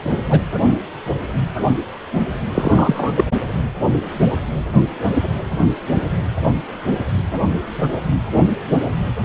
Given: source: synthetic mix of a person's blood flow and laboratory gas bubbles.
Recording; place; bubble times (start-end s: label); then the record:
Doppler ultrasound of blood flow; precordium
0.10-0.23 s: bubbles
0.27-0.41 s: bubbles
2.54-3.24 s: bubbles
From the record:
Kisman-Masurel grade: 223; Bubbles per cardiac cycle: several, 3 to 8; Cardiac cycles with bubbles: 10 to 50%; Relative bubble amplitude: loud (0.450 to 0.775); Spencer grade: 2 (many but less than half of the cardiac periods contain bubble signals, singularly or in groups); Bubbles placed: anywhere in the cardiac cycle